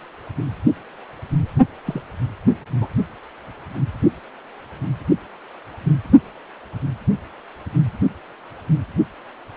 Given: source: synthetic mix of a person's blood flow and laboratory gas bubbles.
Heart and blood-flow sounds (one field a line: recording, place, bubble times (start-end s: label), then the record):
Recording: Doppler ultrasound of blood flow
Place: precordium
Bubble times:
1.85-2.02 s: bubbles
2.81-2.88 s: bubbles
From the record:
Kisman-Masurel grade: 211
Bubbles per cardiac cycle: several, 3 to 8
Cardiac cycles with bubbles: 1 to 10%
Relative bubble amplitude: barely perceptible (0.100 to 0.250)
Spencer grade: 1 (occasional bubble signal discernible with the cardiac motion signal, with majority of cardiac periods free of bubbles)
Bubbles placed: only in the low amplitude regions of the cardiac cycle